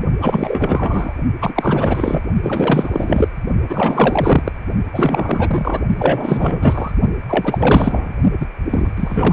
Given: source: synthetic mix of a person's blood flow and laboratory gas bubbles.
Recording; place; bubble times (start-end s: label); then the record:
Doppler ultrasound of blood flow; precordium
0.21-1.14 s: bubbles
1.41-2.23 s: bubbles
2.42-3.28 s: bubbles
3.69-4.52 s: bubbles
4.93-5.80 s: bubbles
5.97-6.92 s: bubbles
7.28-8.14 s: bubbles
8.40-8.46 s: bubbles
8.70-8.91 s: bubbles
8.96-9.33 s: bubbles
From the record:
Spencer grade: 4 (maximum detectable bubble signal sounding continuously throughout systole and diastole of every cardiac period, and overriding the amplitude of the normal cardiac signals); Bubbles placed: only in the low amplitude regions of the cardiac cycle